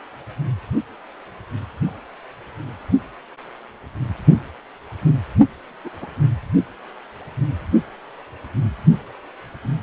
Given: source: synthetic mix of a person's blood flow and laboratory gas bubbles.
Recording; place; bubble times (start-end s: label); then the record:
Doppler ultrasound of blood flow; precordium
5.85-5.91 s: bubbles
6.02-6.06 s: bubbles
From the record:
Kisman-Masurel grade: 111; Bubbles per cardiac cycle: 1 to 2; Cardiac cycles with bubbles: 1 to 10%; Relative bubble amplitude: barely perceptible (0.100 to 0.250); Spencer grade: 1 (occasional bubble signal discernible with the cardiac motion signal, with majority of cardiac periods free of bubbles); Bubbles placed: only in the low amplitude regions of the cardiac cycle